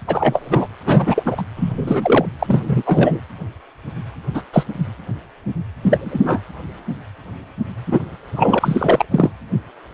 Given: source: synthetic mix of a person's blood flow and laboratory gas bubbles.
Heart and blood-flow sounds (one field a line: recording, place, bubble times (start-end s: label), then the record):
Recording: Doppler ultrasound of blood flow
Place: precordium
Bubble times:
0.07-0.68 s: bubbles
0.85-1.43 s: bubbles
1.56-2.26 s: bubbles
2.39-2.83 s: bubbles
2.85-3.19 s: bubbles
4.34-4.43 s: bubbles
4.53-4.63 s: bubbles
5.83-6.40 s: bubbles
7.87-8.00 s: bubbles
8.36-9.05 s: bubbles
9.11-9.31 s: bubbles
From the record:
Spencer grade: 3 (all of the cardiac periods contain showers or single bubble signals, but not dominating or overriding the cardiac motion signals)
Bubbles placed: anywhere in the cardiac cycle